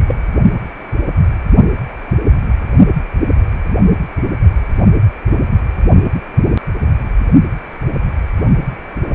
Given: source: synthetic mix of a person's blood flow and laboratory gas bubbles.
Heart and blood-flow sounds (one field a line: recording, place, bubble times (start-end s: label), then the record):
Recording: Doppler ultrasound of blood flow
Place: precordium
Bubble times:
0.07-0.15 s: bubbles
From the record:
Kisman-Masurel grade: 123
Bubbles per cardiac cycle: 1 to 2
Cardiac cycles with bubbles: 10 to 50%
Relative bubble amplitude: loud (0.450 to 0.775)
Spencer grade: 2 (many but less than half of the cardiac periods contain bubble signals, singularly or in groups)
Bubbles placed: only in the low amplitude regions of the cardiac cycle